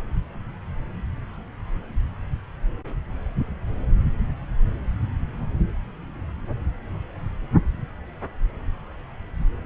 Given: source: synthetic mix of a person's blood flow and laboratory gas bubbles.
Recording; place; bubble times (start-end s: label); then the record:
Doppler ultrasound of blood flow; subclavian vein
no bubbles
From the record:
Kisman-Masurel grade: 000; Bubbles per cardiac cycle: 0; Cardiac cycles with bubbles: 0%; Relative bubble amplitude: no bubbles discernible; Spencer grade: 0 (complete lack of bubble signals)